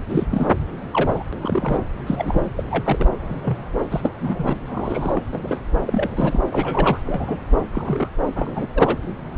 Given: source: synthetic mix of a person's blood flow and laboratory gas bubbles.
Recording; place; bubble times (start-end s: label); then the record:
Doppler ultrasound of blood flow; subclavian vein
0.09-0.26 s: bubbles
0.31-0.49 s: bubbles
0.92-1.24 s: bubbles
1.32-1.38 s: bubbles
1.43-1.78 s: bubbles
2.07-2.49 s: bubbles
2.57-2.63 s: bubbles
2.71-3.11 s: bubbles
3.29-3.34 s: bubbles
3.43-3.58 s: bubbles
3.91-4.13 s: bubbles
4.20-4.56 s: bubbles
4.67-5.23 s: bubbles
5.32-5.40 s: bubbles
5.42-5.62 s: bubbles
5.85-6.40 s: bubbles
6.50-6.99 s: bubbles
7.04-7.38 s: bubbles
7.71-8.09 s: bubbles
8.36-8.67 s: bubbles
8.74-8.98 s: bubbles
From the record:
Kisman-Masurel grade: 242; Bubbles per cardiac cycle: several, 3 to 8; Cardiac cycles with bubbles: 100%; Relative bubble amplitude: moderate (0.250 to 0.450); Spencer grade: 3 (all of the cardiac periods contain showers or single bubble signals, but not dominating or overriding the cardiac motion signals); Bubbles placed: anywhere in the cardiac cycle